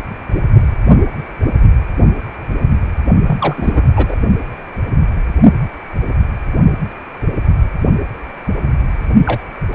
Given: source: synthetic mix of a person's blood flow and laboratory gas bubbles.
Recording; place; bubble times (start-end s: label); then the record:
Doppler ultrasound of blood flow; precordium
3.27-3.92 s: bubbles
3.96-4.16 s: bubbles
9.26-9.39 s: bubbles
9.73-9.75 s: bubbles
From the record:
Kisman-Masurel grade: 223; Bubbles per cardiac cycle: several, 3 to 8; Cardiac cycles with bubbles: 10 to 50%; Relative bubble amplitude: loud (0.450 to 0.775); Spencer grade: 2 (many but less than half of the cardiac periods contain bubble signals, singularly or in groups); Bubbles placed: only in the low amplitude regions of the cardiac cycle